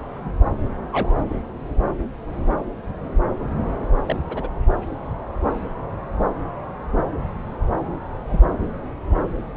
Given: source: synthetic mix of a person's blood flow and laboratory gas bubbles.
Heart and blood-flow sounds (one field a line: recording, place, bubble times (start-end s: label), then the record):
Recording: Doppler ultrasound of blood flow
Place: subclavian vein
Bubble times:
0.92-1.12 s: bubbles
4.05-4.17 s: bubbles
4.29-4.48 s: bubbles
6.97-7.03 s: bubbles
8.29-8.39 s: bubbles
From the record:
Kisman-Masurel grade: 121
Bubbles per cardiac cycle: 1 to 2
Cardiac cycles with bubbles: 10 to 50%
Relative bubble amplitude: barely perceptible (0.100 to 0.250)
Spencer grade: 2 (many but less than half of the cardiac periods contain bubble signals, singularly or in groups)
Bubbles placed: anywhere in the cardiac cycle